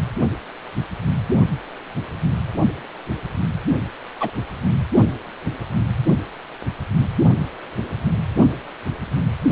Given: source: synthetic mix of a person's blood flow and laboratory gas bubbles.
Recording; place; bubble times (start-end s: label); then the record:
Doppler ultrasound of blood flow; precordium
4.20-4.31 s: bubbles
From the record:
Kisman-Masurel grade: 112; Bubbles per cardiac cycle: 1 to 2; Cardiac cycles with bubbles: 1 to 10%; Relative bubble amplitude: moderate (0.250 to 0.450); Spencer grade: 1 (occasional bubble signal discernible with the cardiac motion signal, with majority of cardiac periods free of bubbles); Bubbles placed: only in the low amplitude regions of the cardiac cycle